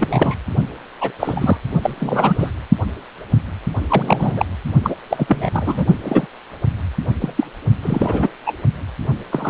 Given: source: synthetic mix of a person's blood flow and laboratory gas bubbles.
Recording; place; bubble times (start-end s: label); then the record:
Doppler ultrasound of blood flow; precordium
0.00-0.37 s: bubbles
1.00-1.11 s: bubbles
1.19-1.57 s: bubbles
1.82-2.52 s: bubbles
3.88-4.46 s: bubbles
4.83-4.95 s: bubbles
5.10-5.50 s: bubbles
5.53-5.86 s: bubbles
6.03-6.27 s: bubbles
7.21-7.33 s: bubbles
7.36-7.46 s: bubbles
7.82-8.29 s: bubbles
8.46-8.54 s: bubbles
9.31-9.49 s: bubbles
From the record:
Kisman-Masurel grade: 233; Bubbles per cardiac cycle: several, 3 to 8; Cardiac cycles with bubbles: 50 to 99%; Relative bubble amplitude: loud (0.450 to 0.775); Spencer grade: 3 (all of the cardiac periods contain showers or single bubble signals, but not dominating or overriding the cardiac motion signals); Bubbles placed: only in the low amplitude regions of the cardiac cycle